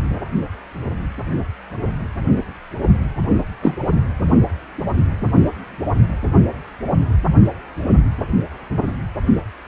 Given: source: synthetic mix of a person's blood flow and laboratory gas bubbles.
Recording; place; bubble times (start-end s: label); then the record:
Doppler ultrasound of blood flow; precordium
3.62-3.75 s: bubbles
From the record:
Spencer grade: 1 (occasional bubble signal discernible with the cardiac motion signal, with majority of cardiac periods free of bubbles); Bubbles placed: anywhere in the cardiac cycle